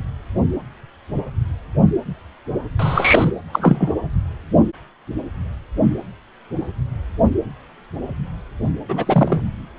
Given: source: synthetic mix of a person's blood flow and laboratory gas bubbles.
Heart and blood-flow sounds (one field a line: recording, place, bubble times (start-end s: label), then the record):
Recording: Doppler ultrasound of blood flow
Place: precordium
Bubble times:
2.79-3.33 s: bubbles
3.47-3.96 s: bubbles
8.88-9.42 s: bubbles
From the record:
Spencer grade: 2 (many but less than half of the cardiac periods contain bubble signals, singularly or in groups)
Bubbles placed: anywhere in the cardiac cycle